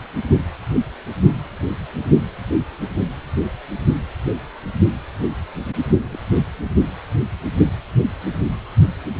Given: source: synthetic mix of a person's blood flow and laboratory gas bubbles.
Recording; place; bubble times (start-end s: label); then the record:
Doppler ultrasound of blood flow; precordium
6.04-6.17 s: bubbles
6.69-6.86 s: bubbles
From the record:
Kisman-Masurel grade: 111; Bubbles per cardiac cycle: 1 to 2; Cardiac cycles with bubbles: 1 to 10%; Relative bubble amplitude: barely perceptible (0.100 to 0.250); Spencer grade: 1 (occasional bubble signal discernible with the cardiac motion signal, with majority of cardiac periods free of bubbles); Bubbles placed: only in the low amplitude regions of the cardiac cycle